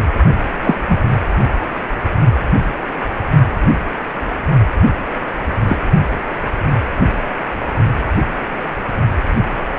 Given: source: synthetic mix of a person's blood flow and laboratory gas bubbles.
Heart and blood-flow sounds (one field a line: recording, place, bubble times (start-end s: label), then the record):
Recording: Doppler ultrasound of blood flow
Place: precordium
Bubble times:
0.62-0.78 s: bubbles
0.89-0.98 s: bubbles
5.68-5.77 s: bubbles
From the record:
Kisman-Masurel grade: 123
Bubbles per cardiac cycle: 1 to 2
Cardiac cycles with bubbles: 10 to 50%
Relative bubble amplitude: loud (0.450 to 0.775)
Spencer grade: 2 (many but less than half of the cardiac periods contain bubble signals, singularly or in groups)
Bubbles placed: only in the low amplitude regions of the cardiac cycle